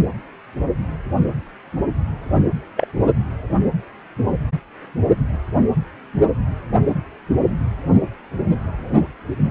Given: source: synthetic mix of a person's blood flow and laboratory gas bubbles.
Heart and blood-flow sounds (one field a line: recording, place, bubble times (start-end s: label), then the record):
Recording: Doppler ultrasound of blood flow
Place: precordium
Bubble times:
2.33-2.42 s: bubbles
2.77-2.88 s: bubbles
From the record:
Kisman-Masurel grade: 122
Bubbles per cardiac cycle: 1 to 2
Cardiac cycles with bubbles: 10 to 50%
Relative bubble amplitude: moderate (0.250 to 0.450)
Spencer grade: 2 (many but less than half of the cardiac periods contain bubble signals, singularly or in groups)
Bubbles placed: anywhere in the cardiac cycle